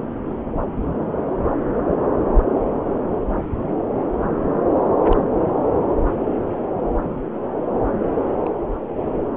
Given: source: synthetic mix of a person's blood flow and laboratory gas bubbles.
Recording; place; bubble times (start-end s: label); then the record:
Doppler ultrasound of blood flow; subclavian vein
5.11-5.15 s: bubbles
8.44-8.49 s: bubbles
From the record:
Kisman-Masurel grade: 121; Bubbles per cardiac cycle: 1 to 2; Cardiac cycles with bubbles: 10 to 50%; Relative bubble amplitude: barely perceptible (0.100 to 0.250); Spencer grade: 2 (many but less than half of the cardiac periods contain bubble signals, singularly or in groups); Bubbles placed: anywhere in the cardiac cycle